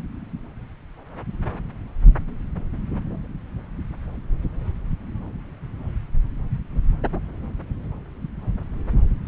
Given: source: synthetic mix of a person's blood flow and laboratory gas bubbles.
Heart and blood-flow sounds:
Doppler ultrasound of blood flow; subclavian vein
no bubbles
From the record:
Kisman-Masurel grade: 000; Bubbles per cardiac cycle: 0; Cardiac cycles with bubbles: 0%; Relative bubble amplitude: no bubbles discernible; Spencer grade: 0 (complete lack of bubble signals)

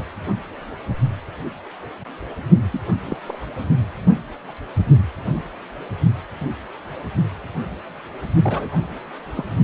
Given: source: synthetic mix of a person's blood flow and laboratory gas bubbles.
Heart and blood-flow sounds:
Doppler ultrasound of blood flow; precordium
2.71-2.81 s: bubbles
3.05-3.17 s: bubbles
3.27-3.39 s: bubbles
8.44-8.78 s: bubbles
9.35-9.45 s: bubbles
From the record:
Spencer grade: 2 (many but less than half of the cardiac periods contain bubble signals, singularly or in groups); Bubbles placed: only in the low amplitude regions of the cardiac cycle

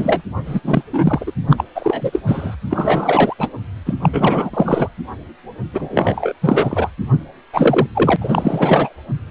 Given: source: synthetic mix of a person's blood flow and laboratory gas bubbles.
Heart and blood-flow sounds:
Doppler ultrasound of blood flow; precordium
0.00-0.22 s: bubbles
0.46-0.59 s: bubbles
0.64-0.83 s: bubbles
0.93-1.31 s: bubbles
1.50-1.65 s: bubbles
1.75-2.20 s: bubbles
2.26-2.55 s: bubbles
2.70-3.34 s: bubbles
3.38-3.50 s: bubbles
3.85-3.94 s: bubbles
4.01-4.09 s: bubbles
4.13-4.50 s: bubbles
4.53-4.89 s: bubbles
5.73-6.33 s: bubbles
6.42-6.91 s: bubbles
7.53-7.86 s: bubbles
7.94-8.17 s: bubbles
8.21-8.94 s: bubbles
From the record:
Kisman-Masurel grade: 343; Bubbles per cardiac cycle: rolling drumbeat, 9 or more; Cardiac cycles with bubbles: 100%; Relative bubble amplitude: loud (0.450 to 0.775); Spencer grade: 3 (all of the cardiac periods contain showers or single bubble signals, but not dominating or overriding the cardiac motion signals); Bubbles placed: anywhere in the cardiac cycle

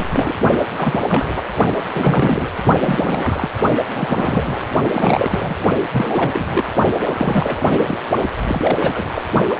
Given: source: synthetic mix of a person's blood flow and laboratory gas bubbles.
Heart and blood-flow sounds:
Doppler ultrasound of blood flow; precordium
0.00-0.08 s: bubbles
0.11-0.34 s: bubbles
0.76-1.04 s: bubbles
1.08-1.44 s: bubbles
1.94-2.49 s: bubbles
2.81-3.48 s: bubbles
3.95-4.65 s: bubbles
4.94-5.55 s: bubbles
5.92-6.66 s: bubbles
7.04-7.80 s: bubbles
7.83-7.98 s: bubbles
8.19-8.25 s: bubbles
8.46-9.11 s: bubbles
9.14-9.22 s: bubbles
9.49-9.54 s: bubbles
From the record:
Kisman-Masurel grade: 342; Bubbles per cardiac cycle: rolling drumbeat, 9 or more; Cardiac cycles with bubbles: 100%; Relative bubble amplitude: moderate (0.250 to 0.450); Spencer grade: 3 (all of the cardiac periods contain showers or single bubble signals, but not dominating or overriding the cardiac motion signals); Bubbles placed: only in the low amplitude regions of the cardiac cycle

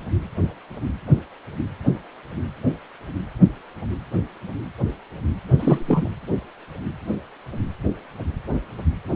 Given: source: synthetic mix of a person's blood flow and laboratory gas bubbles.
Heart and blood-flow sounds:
Doppler ultrasound of blood flow; precordium
5.60-6.10 s: bubbles
From the record:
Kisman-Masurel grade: 222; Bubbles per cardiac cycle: several, 3 to 8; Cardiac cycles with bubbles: 10 to 50%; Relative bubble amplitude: moderate (0.250 to 0.450); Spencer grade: 2 (many but less than half of the cardiac periods contain bubble signals, singularly or in groups); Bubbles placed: anywhere in the cardiac cycle

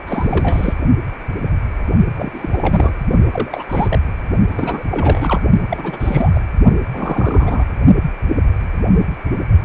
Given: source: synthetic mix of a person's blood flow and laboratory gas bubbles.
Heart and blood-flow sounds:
Doppler ultrasound of blood flow; precordium
0.07-0.74 s: bubbles
2.17-2.93 s: bubbles
3.31-3.65 s: bubbles
3.69-3.99 s: bubbles
4.51-4.85 s: bubbles
4.91-5.41 s: bubbles
5.71-6.31 s: bubbles
6.34-6.41 s: bubbles
6.92-7.66 s: bubbles
From the record:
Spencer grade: 3 (all of the cardiac periods contain showers or single bubble signals, but not dominating or overriding the cardiac motion signals); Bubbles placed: only in the low amplitude regions of the cardiac cycle

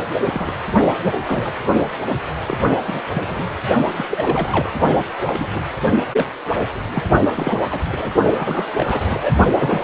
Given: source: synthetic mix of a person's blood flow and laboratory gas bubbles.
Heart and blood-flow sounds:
Doppler ultrasound of blood flow; precordium
0.20-0.53 s: bubbles
1.03-1.14 s: bubbles
1.25-1.52 s: bubbles
1.78-1.81 s: bubbles
2.08-2.18 s: bubbles
2.48-2.60 s: bubbles
2.87-3.02 s: bubbles
3.12-3.49 s: bubbles
3.96-4.05 s: bubbles
4.10-4.71 s: bubbles
5.24-5.47 s: bubbles
5.52-5.63 s: bubbles
6.17-6.27 s: bubbles
6.92-7.04 s: bubbles
7.19-7.57 s: bubbles
7.70-7.83 s: bubbles
7.88-8.11 s: bubbles
8.37-9.32 s: bubbles
9.53-9.84 s: bubbles
From the record:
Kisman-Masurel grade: 242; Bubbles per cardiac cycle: several, 3 to 8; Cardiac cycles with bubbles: 100%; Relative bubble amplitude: moderate (0.250 to 0.450); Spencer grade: 3 (all of the cardiac periods contain showers or single bubble signals, but not dominating or overriding the cardiac motion signals); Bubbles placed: only in the low amplitude regions of the cardiac cycle

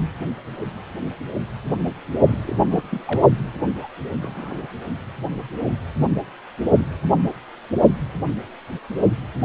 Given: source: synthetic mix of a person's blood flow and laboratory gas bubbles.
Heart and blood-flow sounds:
Doppler ultrasound of blood flow; precordium
2.27-2.55 s: bubbles
2.69-2.83 s: bubbles
2.90-3.30 s: bubbles
3.76-3.89 s: bubbles
4.22-4.67 s: bubbles
From the record:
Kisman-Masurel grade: 221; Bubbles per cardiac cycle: several, 3 to 8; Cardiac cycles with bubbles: 10 to 50%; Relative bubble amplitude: barely perceptible (0.100 to 0.250); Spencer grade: 2 (many but less than half of the cardiac periods contain bubble signals, singularly or in groups); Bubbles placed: only in the low amplitude regions of the cardiac cycle

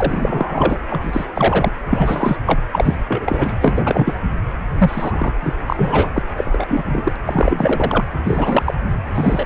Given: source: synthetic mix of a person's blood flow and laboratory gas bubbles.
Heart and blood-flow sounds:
Doppler ultrasound of blood flow; precordium
0.00-0.78 s: bubbles
0.89-1.25 s: bubbles
1.33-1.71 s: bubbles
1.85-2.36 s: bubbles
2.46-2.61 s: bubbles
2.72-2.96 s: bubbles
3.07-3.55 s: bubbles
3.60-4.13 s: bubbles
4.78-5.33 s: bubbles
5.42-5.54 s: bubbles
5.66-6.12 s: bubbles
6.16-6.22 s: bubbles
6.35-7.16 s: bubbles
7.25-8.04 s: bubbles
8.24-8.74 s: bubbles
9.14-9.46 s: bubbles
From the record:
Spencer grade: 3 (all of the cardiac periods contain showers or single bubble signals, but not dominating or overriding the cardiac motion signals); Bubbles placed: anywhere in the cardiac cycle

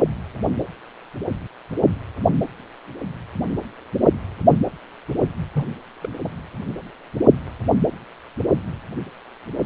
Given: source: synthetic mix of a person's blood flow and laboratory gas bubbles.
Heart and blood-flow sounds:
Doppler ultrasound of blood flow; precordium
5.54-5.66 s: bubbles
6.02-6.08 s: bubbles
6.22-6.41 s: bubbles
From the record:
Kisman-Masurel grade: 211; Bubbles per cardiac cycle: several, 3 to 8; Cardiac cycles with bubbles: 1 to 10%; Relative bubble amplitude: barely perceptible (0.100 to 0.250); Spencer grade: 1 (occasional bubble signal discernible with the cardiac motion signal, with majority of cardiac periods free of bubbles); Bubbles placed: anywhere in the cardiac cycle

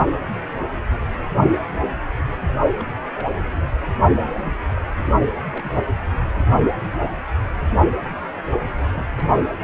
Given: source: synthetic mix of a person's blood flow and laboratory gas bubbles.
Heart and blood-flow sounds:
Doppler ultrasound of blood flow; precordium
2.79-2.83 s: bubbles
3.14-3.28 s: bubbles
4.41-4.52 s: bubbles
4.74-4.82 s: bubbles
5.51-5.70 s: bubbles
8.93-9.07 s: bubbles
9.16-9.24 s: bubbles
From the record:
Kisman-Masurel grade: 121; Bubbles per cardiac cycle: 1 to 2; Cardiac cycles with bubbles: 10 to 50%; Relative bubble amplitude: barely perceptible (0.100 to 0.250); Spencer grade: 2 (many but less than half of the cardiac periods contain bubble signals, singularly or in groups); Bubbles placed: anywhere in the cardiac cycle

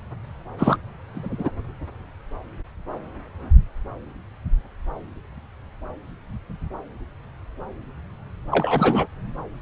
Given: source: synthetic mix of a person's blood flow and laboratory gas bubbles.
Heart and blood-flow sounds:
Doppler ultrasound of blood flow; subclavian vein
0.57-0.77 s: bubbles
1.15-1.50 s: bubbles
8.51-9.06 s: bubbles
From the record:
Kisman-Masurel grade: 223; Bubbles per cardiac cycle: several, 3 to 8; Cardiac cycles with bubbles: 10 to 50%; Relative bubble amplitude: loud (0.450 to 0.775); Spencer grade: 2 (many but less than half of the cardiac periods contain bubble signals, singularly or in groups); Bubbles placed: anywhere in the cardiac cycle

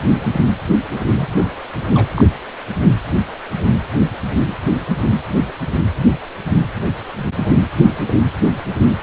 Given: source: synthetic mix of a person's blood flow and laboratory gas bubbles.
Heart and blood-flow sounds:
Doppler ultrasound of blood flow; precordium
0.90-1.05 s: bubbles
1.15-1.30 s: bubbles
1.34-1.49 s: bubbles
1.84-2.10 s: bubbles
2.15-2.24 s: bubbles
From the record:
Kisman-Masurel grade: 211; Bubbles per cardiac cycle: several, 3 to 8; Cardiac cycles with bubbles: 1 to 10%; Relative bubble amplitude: barely perceptible (0.100 to 0.250); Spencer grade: 1 (occasional bubble signal discernible with the cardiac motion signal, with majority of cardiac periods free of bubbles); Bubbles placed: anywhere in the cardiac cycle

